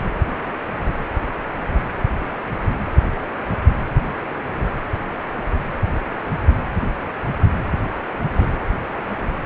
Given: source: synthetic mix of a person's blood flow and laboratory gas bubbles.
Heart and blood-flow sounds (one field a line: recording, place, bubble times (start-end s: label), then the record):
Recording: Doppler ultrasound of blood flow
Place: precordium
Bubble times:
8.37-8.47 s: bubbles
From the record:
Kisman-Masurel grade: 112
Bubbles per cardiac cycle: 1 to 2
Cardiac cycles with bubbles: 1 to 10%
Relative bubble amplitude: moderate (0.250 to 0.450)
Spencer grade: 1 (occasional bubble signal discernible with the cardiac motion signal, with majority of cardiac periods free of bubbles)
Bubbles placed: anywhere in the cardiac cycle